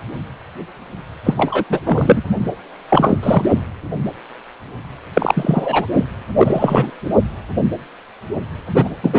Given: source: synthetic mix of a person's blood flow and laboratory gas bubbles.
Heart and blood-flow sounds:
Doppler ultrasound of blood flow; precordium
1.24-1.64 s: bubbles
1.69-1.80 s: bubbles
1.83-2.23 s: bubbles
2.90-3.17 s: bubbles
3.21-3.46 s: bubbles
5.14-5.86 s: bubbles
5.96-6.05 s: bubbles
6.38-6.91 s: bubbles
8.66-8.89 s: bubbles
9.03-9.19 s: bubbles
From the record:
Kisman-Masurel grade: 233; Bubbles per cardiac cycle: several, 3 to 8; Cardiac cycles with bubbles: 50 to 99%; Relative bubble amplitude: loud (0.450 to 0.775); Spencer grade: 3 (all of the cardiac periods contain showers or single bubble signals, but not dominating or overriding the cardiac motion signals); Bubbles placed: anywhere in the cardiac cycle

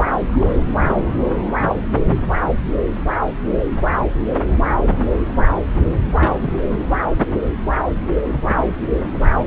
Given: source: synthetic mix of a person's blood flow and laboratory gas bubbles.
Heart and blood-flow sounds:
Doppler ultrasound of blood flow; subclavian vein
0.26-0.97 s: bubbles
1.06-1.10 s: bubbles
6.05-6.10 s: bubbles
6.18-6.57 s: bubbles
6.60-6.90 s: bubbles
From the record:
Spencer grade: 2 (many but less than half of the cardiac periods contain bubble signals, singularly or in groups); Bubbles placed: anywhere in the cardiac cycle

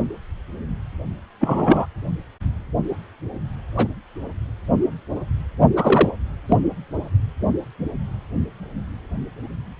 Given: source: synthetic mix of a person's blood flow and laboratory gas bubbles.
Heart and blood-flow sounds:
Doppler ultrasound of blood flow; precordium
1.41-1.86 s: bubbles
3.76-3.87 s: bubbles
5.76-6.09 s: bubbles
6.48-6.56 s: bubbles
From the record:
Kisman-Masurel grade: 123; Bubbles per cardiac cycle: 1 to 2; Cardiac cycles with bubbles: 10 to 50%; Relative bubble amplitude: loud (0.450 to 0.775); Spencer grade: 2 (many but less than half of the cardiac periods contain bubble signals, singularly or in groups); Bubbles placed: anywhere in the cardiac cycle

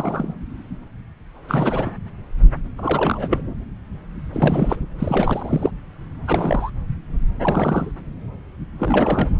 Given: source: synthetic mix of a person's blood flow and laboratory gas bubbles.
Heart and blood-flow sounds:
Doppler ultrasound of blood flow; subclavian vein
0.00-0.34 s: bubbles
1.48-1.91 s: bubbles
2.77-3.43 s: bubbles
4.32-4.80 s: bubbles
4.98-5.71 s: bubbles
6.27-6.70 s: bubbles
7.42-7.92 s: bubbles
8.79-9.31 s: bubbles
From the record:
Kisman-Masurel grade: 332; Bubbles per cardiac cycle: rolling drumbeat, 9 or more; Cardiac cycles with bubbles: 50 to 99%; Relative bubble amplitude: moderate (0.250 to 0.450); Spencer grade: 3 (all of the cardiac periods contain showers or single bubble signals, but not dominating or overriding the cardiac motion signals); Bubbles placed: anywhere in the cardiac cycle

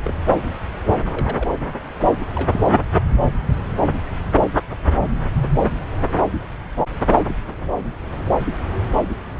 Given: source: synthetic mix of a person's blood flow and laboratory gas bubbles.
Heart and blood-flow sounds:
Doppler ultrasound of blood flow; subclavian vein
0.05-0.19 s: bubbles
1.13-1.50 s: bubbles
2.35-2.50 s: bubbles
2.52-2.60 s: bubbles
From the record:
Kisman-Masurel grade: 121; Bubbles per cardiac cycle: 1 to 2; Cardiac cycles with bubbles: 10 to 50%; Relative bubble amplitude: barely perceptible (0.100 to 0.250); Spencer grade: 2 (many but less than half of the cardiac periods contain bubble signals, singularly or in groups); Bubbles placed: anywhere in the cardiac cycle

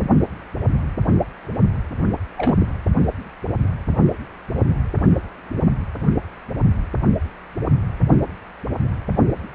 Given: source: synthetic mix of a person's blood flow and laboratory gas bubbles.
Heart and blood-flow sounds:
Doppler ultrasound of blood flow; precordium
2.37-2.57 s: bubbles
2.60-2.67 s: bubbles
From the record:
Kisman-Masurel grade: 222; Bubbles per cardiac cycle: several, 3 to 8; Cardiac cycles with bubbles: 10 to 50%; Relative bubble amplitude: moderate (0.250 to 0.450); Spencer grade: 2 (many but less than half of the cardiac periods contain bubble signals, singularly or in groups); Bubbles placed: only in the low amplitude regions of the cardiac cycle

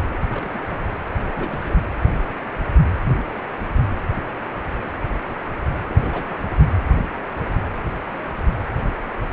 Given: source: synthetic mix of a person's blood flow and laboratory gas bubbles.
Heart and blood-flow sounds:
Doppler ultrasound of blood flow; precordium
0.12-0.17 s: bubbles
0.29-0.61 s: bubbles
0.70-0.79 s: bubbles
1.20-1.76 s: bubbles
5.89-6.35 s: bubbles
6.50-6.56 s: bubbles
From the record:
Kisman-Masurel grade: 221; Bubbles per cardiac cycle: several, 3 to 8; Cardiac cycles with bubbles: 10 to 50%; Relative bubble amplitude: barely perceptible (0.100 to 0.250); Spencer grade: 2 (many but less than half of the cardiac periods contain bubble signals, singularly or in groups); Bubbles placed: anywhere in the cardiac cycle

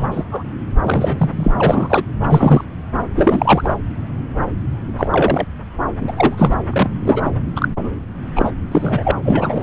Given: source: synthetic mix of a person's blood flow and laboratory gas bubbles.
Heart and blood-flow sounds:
Doppler ultrasound of blood flow; subclavian vein
0.00-0.08 s: bubbles
0.10-0.25 s: bubbles
0.32-0.43 s: bubbles
0.81-1.52 s: bubbles
1.58-2.03 s: bubbles
2.23-2.65 s: bubbles
3.16-3.77 s: bubbles
4.97-5.45 s: bubbles
6.01-6.12 s: bubbles
6.16-6.54 s: bubbles
6.70-7.22 s: bubbles
7.25-7.30 s: bubbles
7.55-7.68 s: bubbles
7.79-7.95 s: bubbles
8.35-8.52 s: bubbles
8.71-9.12 s: bubbles
9.25-9.63 s: bubbles
From the record:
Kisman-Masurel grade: 233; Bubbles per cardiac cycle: several, 3 to 8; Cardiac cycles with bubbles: 50 to 99%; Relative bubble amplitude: loud (0.450 to 0.775); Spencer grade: 3 (all of the cardiac periods contain showers or single bubble signals, but not dominating or overriding the cardiac motion signals); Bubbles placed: anywhere in the cardiac cycle

